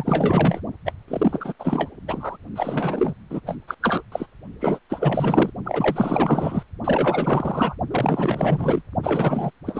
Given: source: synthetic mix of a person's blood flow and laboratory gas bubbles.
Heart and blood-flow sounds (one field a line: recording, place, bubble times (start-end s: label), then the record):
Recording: Doppler ultrasound of blood flow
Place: precordium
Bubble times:
0.00-0.61 s: bubbles
0.85-0.92 s: bubbles
1.08-1.54 s: bubbles
1.59-1.90 s: bubbles
2.07-2.37 s: bubbles
2.55-3.14 s: bubbles
3.29-3.40 s: bubbles
3.46-3.58 s: bubbles
3.67-3.74 s: bubbles
3.81-4.03 s: bubbles
4.12-4.27 s: bubbles
4.60-4.79 s: bubbles
4.90-5.50 s: bubbles
5.64-6.63 s: bubbles
6.84-7.76 s: bubbles
7.91-8.82 s: bubbles
9.02-9.50 s: bubbles
9.65-9.80 s: bubbles
From the record:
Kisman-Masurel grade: 444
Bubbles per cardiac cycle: continuous sound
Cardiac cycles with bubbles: 100%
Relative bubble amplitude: maximal (0.775 to 0.999)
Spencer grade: 4 (maximum detectable bubble signal sounding continuously throughout systole and diastole of every cardiac period, and overriding the amplitude of the normal cardiac signals)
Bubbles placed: only in the low amplitude regions of the cardiac cycle